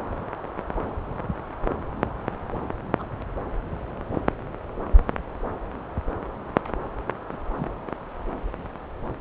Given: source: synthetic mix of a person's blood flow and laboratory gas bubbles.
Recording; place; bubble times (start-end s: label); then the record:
Doppler ultrasound of blood flow; subclavian vein
2.02-2.11 s: bubbles
2.99-3.06 s: bubbles
7.31-7.37 s: bubbles
7.55-7.69 s: bubbles
From the record:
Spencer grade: 2 (many but less than half of the cardiac periods contain bubble signals, singularly or in groups); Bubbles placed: anywhere in the cardiac cycle